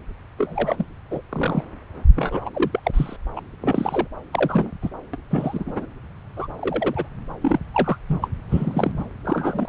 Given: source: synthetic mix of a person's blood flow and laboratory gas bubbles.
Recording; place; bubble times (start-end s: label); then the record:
Doppler ultrasound of blood flow; subclavian vein
0.38-0.85 s: bubbles
1.10-1.21 s: bubbles
1.29-1.64 s: bubbles
2.15-2.50 s: bubbles
2.54-2.80 s: bubbles
2.83-3.17 s: bubbles
3.35-3.41 s: bubbles
3.61-4.08 s: bubbles
4.33-4.71 s: bubbles
4.82-4.90 s: bubbles
5.13-5.16 s: bubbles
5.30-5.86 s: bubbles
6.36-6.47 s: bubbles
6.56-7.08 s: bubbles
7.41-7.60 s: bubbles
7.74-7.98 s: bubbles
8.08-8.29 s: bubbles
8.49-8.91 s: bubbles
8.99-9.04 s: bubbles
9.25-9.69 s: bubbles
From the record:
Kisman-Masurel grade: 242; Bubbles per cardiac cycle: several, 3 to 8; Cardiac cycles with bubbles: 100%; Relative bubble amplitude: moderate (0.250 to 0.450); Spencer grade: 3 (all of the cardiac periods contain showers or single bubble signals, but not dominating or overriding the cardiac motion signals); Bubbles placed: anywhere in the cardiac cycle